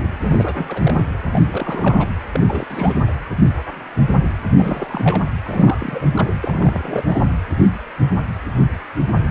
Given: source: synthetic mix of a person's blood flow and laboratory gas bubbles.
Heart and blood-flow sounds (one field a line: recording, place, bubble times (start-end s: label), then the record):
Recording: Doppler ultrasound of blood flow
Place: precordium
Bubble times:
0.00-0.08 s: bubbles
0.21-1.05 s: bubbles
1.31-2.10 s: bubbles
2.31-2.41 s: bubbles
2.45-2.99 s: bubbles
4.52-5.29 s: bubbles
5.42-6.09 s: bubbles
6.16-6.30 s: bubbles
6.43-7.03 s: bubbles
7.06-7.23 s: bubbles
From the record:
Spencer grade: 3 (all of the cardiac periods contain showers or single bubble signals, but not dominating or overriding the cardiac motion signals)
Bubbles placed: anywhere in the cardiac cycle